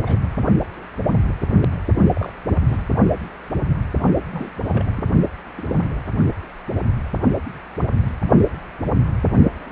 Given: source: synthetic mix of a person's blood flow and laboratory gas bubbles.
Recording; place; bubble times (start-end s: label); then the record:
Doppler ultrasound of blood flow; precordium
0.05-0.28 s: bubbles
1.85-1.97 s: bubbles
2.14-2.32 s: bubbles
2.50-2.60 s: bubbles
2.67-2.82 s: bubbles
4.32-4.50 s: bubbles
4.67-4.85 s: bubbles
4.97-5.03 s: bubbles
5.57-5.64 s: bubbles
5.69-5.89 s: bubbles
From the record:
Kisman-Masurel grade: 221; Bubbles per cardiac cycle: several, 3 to 8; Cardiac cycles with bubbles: 10 to 50%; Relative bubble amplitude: barely perceptible (0.100 to 0.250); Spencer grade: 2 (many but less than half of the cardiac periods contain bubble signals, singularly or in groups); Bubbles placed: only in the low amplitude regions of the cardiac cycle